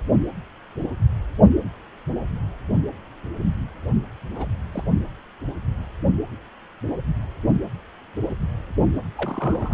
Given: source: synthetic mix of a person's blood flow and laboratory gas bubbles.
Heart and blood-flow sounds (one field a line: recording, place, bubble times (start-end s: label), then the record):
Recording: Doppler ultrasound of blood flow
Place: precordium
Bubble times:
4.34-4.46 s: bubbles
4.72-4.84 s: bubbles
9.15-9.74 s: bubbles
From the record:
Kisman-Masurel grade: 221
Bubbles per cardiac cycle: several, 3 to 8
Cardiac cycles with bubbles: 10 to 50%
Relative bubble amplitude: barely perceptible (0.100 to 0.250)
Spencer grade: 2 (many but less than half of the cardiac periods contain bubble signals, singularly or in groups)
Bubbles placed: only in the low amplitude regions of the cardiac cycle